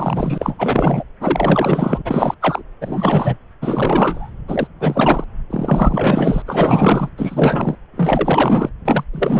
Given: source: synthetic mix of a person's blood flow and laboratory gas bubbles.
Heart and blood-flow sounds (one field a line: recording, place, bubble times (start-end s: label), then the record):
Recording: Doppler ultrasound of blood flow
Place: subclavian vein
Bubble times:
0.00-1.04 s: bubbles
1.20-2.02 s: bubbles
2.04-2.35 s: bubbles
2.41-2.62 s: bubbles
2.81-3.38 s: bubbles
3.62-4.31 s: bubbles
4.47-4.67 s: bubbles
4.79-5.24 s: bubbles
5.50-6.42 s: bubbles
6.46-7.09 s: bubbles
7.17-7.75 s: bubbles
7.96-8.70 s: bubbles
8.85-9.04 s: bubbles
9.12-9.40 s: bubbles
From the record:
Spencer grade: 4 (maximum detectable bubble signal sounding continuously throughout systole and diastole of every cardiac period, and overriding the amplitude of the normal cardiac signals)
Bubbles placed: anywhere in the cardiac cycle